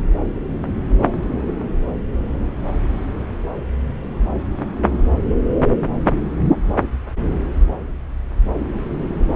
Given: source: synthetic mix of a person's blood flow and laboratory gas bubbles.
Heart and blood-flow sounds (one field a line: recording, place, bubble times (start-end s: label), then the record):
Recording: Doppler ultrasound of blood flow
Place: subclavian vein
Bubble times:
9.29-9.36 s: bubbles
From the record:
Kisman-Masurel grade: 111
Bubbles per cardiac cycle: 1 to 2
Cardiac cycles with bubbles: 1 to 10%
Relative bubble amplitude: barely perceptible (0.100 to 0.250)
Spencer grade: 1 (occasional bubble signal discernible with the cardiac motion signal, with majority of cardiac periods free of bubbles)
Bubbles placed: anywhere in the cardiac cycle